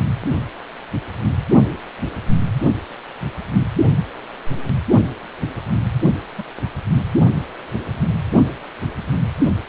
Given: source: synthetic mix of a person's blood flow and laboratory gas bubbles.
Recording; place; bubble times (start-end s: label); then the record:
Doppler ultrasound of blood flow; precordium
6.35-6.46 s: bubbles
6.64-6.68 s: bubbles
From the record:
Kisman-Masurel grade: 111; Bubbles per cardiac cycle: 1 to 2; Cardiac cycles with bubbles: 1 to 10%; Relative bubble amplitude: barely perceptible (0.100 to 0.250); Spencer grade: 1 (occasional bubble signal discernible with the cardiac motion signal, with majority of cardiac periods free of bubbles); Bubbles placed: only in the low amplitude regions of the cardiac cycle